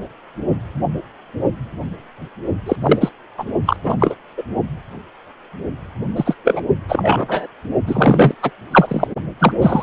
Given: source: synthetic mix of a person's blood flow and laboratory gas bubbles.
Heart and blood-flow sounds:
Doppler ultrasound of blood flow; precordium
2.66-2.76 s: bubbles
2.82-3.12 s: bubbles
3.38-3.45 s: bubbles
3.65-3.77 s: bubbles
3.83-3.96 s: bubbles
3.99-4.15 s: bubbles
4.37-4.43 s: bubbles
6.15-6.35 s: bubbles
6.44-6.61 s: bubbles
6.88-7.47 s: bubbles
7.87-8.34 s: bubbles
8.42-8.50 s: bubbles
8.71-9.07 s: bubbles
9.39-9.53 s: bubbles
9.60-9.83 s: bubbles
From the record:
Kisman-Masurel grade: 223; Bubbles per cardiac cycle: several, 3 to 8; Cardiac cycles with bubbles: 10 to 50%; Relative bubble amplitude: loud (0.450 to 0.775); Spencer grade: 2 (many but less than half of the cardiac periods contain bubble signals, singularly or in groups); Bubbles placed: only in the low amplitude regions of the cardiac cycle

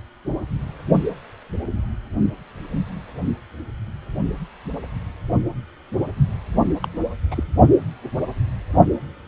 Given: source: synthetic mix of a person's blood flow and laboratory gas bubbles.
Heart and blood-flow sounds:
Doppler ultrasound of blood flow; precordium
6.83-6.88 s: bubbles
7.30-7.43 s: bubbles
From the record:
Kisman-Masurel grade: 221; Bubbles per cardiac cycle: several, 3 to 8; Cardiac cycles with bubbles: 10 to 50%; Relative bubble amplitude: barely perceptible (0.100 to 0.250); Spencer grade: 2 (many but less than half of the cardiac periods contain bubble signals, singularly or in groups); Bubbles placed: only in the low amplitude regions of the cardiac cycle

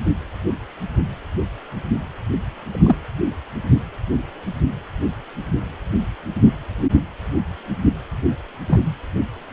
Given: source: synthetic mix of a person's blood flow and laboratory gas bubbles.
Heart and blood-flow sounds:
Doppler ultrasound of blood flow; precordium
2.69-2.98 s: bubbles
8.69-8.93 s: bubbles
From the record:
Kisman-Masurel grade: 123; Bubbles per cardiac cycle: 1 to 2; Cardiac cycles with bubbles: 10 to 50%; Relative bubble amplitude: loud (0.450 to 0.775); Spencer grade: 2 (many but less than half of the cardiac periods contain bubble signals, singularly or in groups); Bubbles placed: anywhere in the cardiac cycle

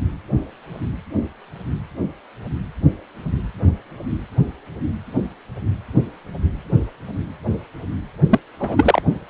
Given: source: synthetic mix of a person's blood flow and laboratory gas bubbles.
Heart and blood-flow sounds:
Doppler ultrasound of blood flow; precordium
8.29-8.39 s: bubbles
8.60-9.02 s: bubbles
From the record:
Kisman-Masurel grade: 213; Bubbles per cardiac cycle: several, 3 to 8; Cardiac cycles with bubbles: 1 to 10%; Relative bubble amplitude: loud (0.450 to 0.775); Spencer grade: 1 (occasional bubble signal discernible with the cardiac motion signal, with majority of cardiac periods free of bubbles); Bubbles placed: only in the low amplitude regions of the cardiac cycle

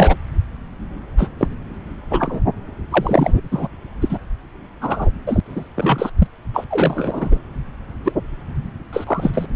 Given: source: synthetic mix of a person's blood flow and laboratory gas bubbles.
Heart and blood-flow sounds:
Doppler ultrasound of blood flow; subclavian vein
0.00-0.16 s: bubbles
1.18-1.28 s: bubbles
1.39-1.48 s: bubbles
2.10-2.41 s: bubbles
2.90-3.40 s: bubbles
3.52-3.68 s: bubbles
4.01-4.18 s: bubbles
4.81-5.11 s: bubbles
5.27-5.41 s: bubbles
5.45-5.70 s: bubbles
5.76-6.10 s: bubbles
6.18-6.27 s: bubbles
6.54-6.65 s: bubbles
6.70-7.39 s: bubbles
8.04-8.12 s: bubbles
8.92-9.46 s: bubbles
From the record:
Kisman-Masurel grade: 243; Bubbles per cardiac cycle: several, 3 to 8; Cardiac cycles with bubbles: 100%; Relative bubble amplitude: loud (0.450 to 0.775); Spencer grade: 3 (all of the cardiac periods contain showers or single bubble signals, but not dominating or overriding the cardiac motion signals); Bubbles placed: anywhere in the cardiac cycle

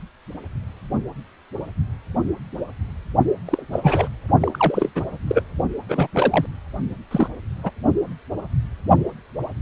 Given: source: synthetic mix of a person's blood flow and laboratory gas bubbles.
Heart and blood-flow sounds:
Doppler ultrasound of blood flow; precordium
3.46-3.62 s: bubbles
3.72-4.08 s: bubbles
4.41-4.92 s: bubbles
4.95-5.04 s: bubbles
5.27-5.43 s: bubbles
5.88-6.08 s: bubbles
6.13-6.46 s: bubbles
7.11-7.29 s: bubbles
7.63-7.71 s: bubbles
From the record:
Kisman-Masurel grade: 223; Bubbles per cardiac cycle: several, 3 to 8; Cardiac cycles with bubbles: 10 to 50%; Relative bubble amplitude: loud (0.450 to 0.775); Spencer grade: 2 (many but less than half of the cardiac periods contain bubble signals, singularly or in groups); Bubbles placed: only in the low amplitude regions of the cardiac cycle

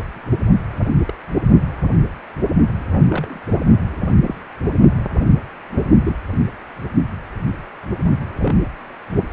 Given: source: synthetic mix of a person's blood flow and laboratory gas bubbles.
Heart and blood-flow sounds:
Doppler ultrasound of blood flow; precordium
1.07-1.12 s: bubbles
3.09-3.40 s: bubbles
4.21-4.35 s: bubbles
6.05-6.16 s: bubbles
8.42-8.56 s: bubbles
From the record:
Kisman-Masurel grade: 121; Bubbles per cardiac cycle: 1 to 2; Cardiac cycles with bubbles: 10 to 50%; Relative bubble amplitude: barely perceptible (0.100 to 0.250); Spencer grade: 2 (many but less than half of the cardiac periods contain bubble signals, singularly or in groups); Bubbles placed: only in the low amplitude regions of the cardiac cycle

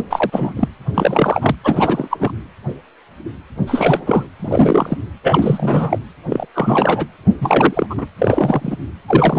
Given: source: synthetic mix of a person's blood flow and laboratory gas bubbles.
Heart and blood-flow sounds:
Doppler ultrasound of blood flow; precordium
0.10-0.52 s: bubbles
0.56-0.68 s: bubbles
0.94-1.56 s: bubbles
1.63-2.31 s: bubbles
3.67-4.28 s: bubbles
4.40-4.98 s: bubbles
5.24-5.99 s: bubbles
6.29-6.46 s: bubbles
6.54-7.06 s: bubbles
7.41-8.06 s: bubbles
8.18-8.77 s: bubbles
9.08-9.39 s: bubbles
From the record:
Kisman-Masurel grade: 333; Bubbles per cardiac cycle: rolling drumbeat, 9 or more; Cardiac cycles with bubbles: 50 to 99%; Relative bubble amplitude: loud (0.450 to 0.775); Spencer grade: 3 (all of the cardiac periods contain showers or single bubble signals, but not dominating or overriding the cardiac motion signals); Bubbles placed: anywhere in the cardiac cycle

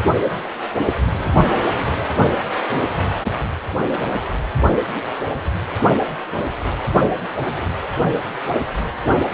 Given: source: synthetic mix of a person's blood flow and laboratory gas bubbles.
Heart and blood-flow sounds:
Doppler ultrasound of blood flow; precordium
no bubbles
From the record:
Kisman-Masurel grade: 000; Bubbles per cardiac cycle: 0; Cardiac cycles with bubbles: 0%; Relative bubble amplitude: no bubbles discernible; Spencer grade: 0 (complete lack of bubble signals)

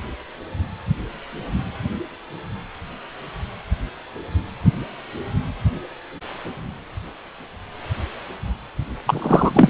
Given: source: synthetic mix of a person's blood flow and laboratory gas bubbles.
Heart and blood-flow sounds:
Doppler ultrasound of blood flow; precordium
9.06-9.70 s: bubbles
From the record:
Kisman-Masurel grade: 213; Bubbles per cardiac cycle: several, 3 to 8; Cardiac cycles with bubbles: 1 to 10%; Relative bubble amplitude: loud (0.450 to 0.775); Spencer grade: 1 (occasional bubble signal discernible with the cardiac motion signal, with majority of cardiac periods free of bubbles); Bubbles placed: anywhere in the cardiac cycle

